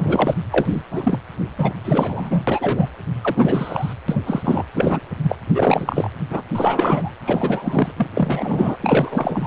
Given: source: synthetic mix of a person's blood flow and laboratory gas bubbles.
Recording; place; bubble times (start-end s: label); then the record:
Doppler ultrasound of blood flow; precordium
0.00-0.34 s: bubbles
0.51-0.82 s: bubbles
0.91-1.19 s: bubbles
1.58-1.75 s: bubbles
1.85-2.42 s: bubbles
2.47-2.90 s: bubbles
3.21-3.95 s: bubbles
4.08-4.21 s: bubbles
4.25-4.42 s: bubbles
4.44-4.65 s: bubbles
4.75-5.00 s: bubbles
5.22-5.37 s: bubbles
5.54-6.09 s: bubbles
6.30-6.42 s: bubbles
6.55-7.15 s: bubbles
7.25-7.92 s: bubbles
7.96-8.07 s: bubbles
8.14-8.77 s: bubbles
8.82-9.47 s: bubbles
From the record:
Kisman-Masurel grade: 343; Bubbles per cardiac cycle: rolling drumbeat, 9 or more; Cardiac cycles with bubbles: 100%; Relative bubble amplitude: loud (0.450 to 0.775); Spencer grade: 3 (all of the cardiac periods contain showers or single bubble signals, but not dominating or overriding the cardiac motion signals); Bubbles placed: anywhere in the cardiac cycle